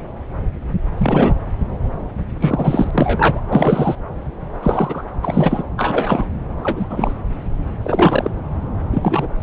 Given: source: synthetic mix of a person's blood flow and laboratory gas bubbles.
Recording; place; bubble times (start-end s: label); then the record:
Doppler ultrasound of blood flow; subclavian vein
0.97-1.35 s: bubbles
2.40-3.40 s: bubbles
3.47-3.95 s: bubbles
4.60-5.04 s: bubbles
5.22-5.63 s: bubbles
5.77-6.27 s: bubbles
6.62-7.13 s: bubbles
7.83-8.31 s: bubbles
8.92-9.28 s: bubbles
From the record:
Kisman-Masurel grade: 233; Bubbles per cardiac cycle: several, 3 to 8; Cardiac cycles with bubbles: 50 to 99%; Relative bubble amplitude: loud (0.450 to 0.775); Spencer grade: 3 (all of the cardiac periods contain showers or single bubble signals, but not dominating or overriding the cardiac motion signals); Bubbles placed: anywhere in the cardiac cycle